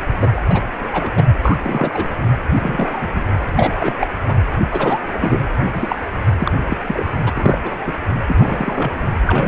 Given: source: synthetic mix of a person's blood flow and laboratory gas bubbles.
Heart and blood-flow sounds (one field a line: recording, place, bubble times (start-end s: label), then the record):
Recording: Doppler ultrasound of blood flow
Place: precordium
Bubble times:
0.20-0.31 s: bubbles
0.33-0.41 s: bubbles
0.50-0.62 s: bubbles
0.80-0.89 s: bubbles
0.92-1.10 s: bubbles
1.15-1.25 s: bubbles
1.42-1.58 s: bubbles
1.64-2.19 s: bubbles
2.60-3.09 s: bubbles
3.15-3.28 s: bubbles
3.56-3.75 s: bubbles
3.79-3.95 s: bubbles
4.00-4.07 s: bubbles
4.27-4.34 s: bubbles
4.71-4.98 s: bubbles
5.21-5.40 s: bubbles
5.51-5.96 s: bubbles
6.39-6.58 s: bubbles
6.68-6.77 s: bubbles
6.87-7.11 s: bubbles
7.26-7.32 s: bubbles
7.37-7.59 s: bubbles
7.64-7.92 s: bubbles
8.28-9.06 s: bubbles
9.26-9.48 s: bubbles
From the record:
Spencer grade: 3 (all of the cardiac periods contain showers or single bubble signals, but not dominating or overriding the cardiac motion signals)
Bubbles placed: anywhere in the cardiac cycle